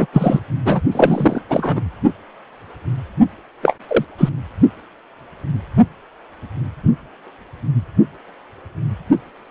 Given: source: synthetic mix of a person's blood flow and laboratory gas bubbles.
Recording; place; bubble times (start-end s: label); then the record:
Doppler ultrasound of blood flow; precordium
0.00-0.06 s: bubbles
0.13-0.40 s: bubbles
0.65-0.81 s: bubbles
0.92-1.42 s: bubbles
1.49-1.81 s: bubbles
3.62-3.75 s: bubbles
3.88-4.04 s: bubbles
4.17-4.29 s: bubbles
From the record:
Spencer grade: 2 (many but less than half of the cardiac periods contain bubble signals, singularly or in groups); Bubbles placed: only in the low amplitude regions of the cardiac cycle